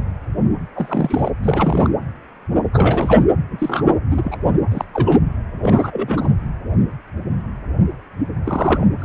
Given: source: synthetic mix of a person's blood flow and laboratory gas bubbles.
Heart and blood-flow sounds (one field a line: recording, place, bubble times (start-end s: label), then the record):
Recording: Doppler ultrasound of blood flow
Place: precordium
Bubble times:
0.75-1.30 s: bubbles
1.43-1.90 s: bubbles
2.73-3.23 s: bubbles
3.50-3.84 s: bubbles
4.10-4.38 s: bubbles
4.71-4.85 s: bubbles
4.93-5.21 s: bubbles
5.62-6.29 s: bubbles
8.44-8.87 s: bubbles
8.98-9.05 s: bubbles
From the record:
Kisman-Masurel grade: 232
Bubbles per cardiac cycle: several, 3 to 8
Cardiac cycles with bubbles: 50 to 99%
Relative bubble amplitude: moderate (0.250 to 0.450)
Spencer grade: 3 (all of the cardiac periods contain showers or single bubble signals, but not dominating or overriding the cardiac motion signals)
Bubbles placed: anywhere in the cardiac cycle